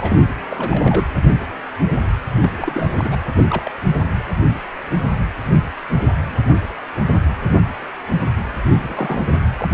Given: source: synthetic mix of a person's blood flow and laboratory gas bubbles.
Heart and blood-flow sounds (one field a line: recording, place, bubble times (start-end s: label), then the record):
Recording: Doppler ultrasound of blood flow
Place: precordium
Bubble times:
0.00-0.21 s: bubbles
0.50-1.08 s: bubbles
2.40-2.90 s: bubbles
2.97-3.17 s: bubbles
3.36-3.44 s: bubbles
3.50-3.72 s: bubbles
3.88-4.09 s: bubbles
8.71-8.79 s: bubbles
8.83-9.22 s: bubbles
9.31-9.41 s: bubbles
9.57-9.68 s: bubbles
From the record:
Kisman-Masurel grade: 222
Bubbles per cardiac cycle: several, 3 to 8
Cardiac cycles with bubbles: 10 to 50%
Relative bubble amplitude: moderate (0.250 to 0.450)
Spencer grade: 2 (many but less than half of the cardiac periods contain bubble signals, singularly or in groups)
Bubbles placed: anywhere in the cardiac cycle